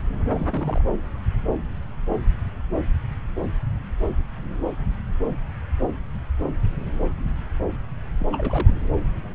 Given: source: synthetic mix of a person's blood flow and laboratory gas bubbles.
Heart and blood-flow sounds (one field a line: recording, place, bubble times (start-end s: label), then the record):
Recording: Doppler ultrasound of blood flow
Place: subclavian vein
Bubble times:
0.30-0.46 s: bubbles
0.52-0.81 s: bubbles
8.20-8.26 s: bubbles
8.31-8.75 s: bubbles
From the record:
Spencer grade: 2 (many but less than half of the cardiac periods contain bubble signals, singularly or in groups)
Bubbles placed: anywhere in the cardiac cycle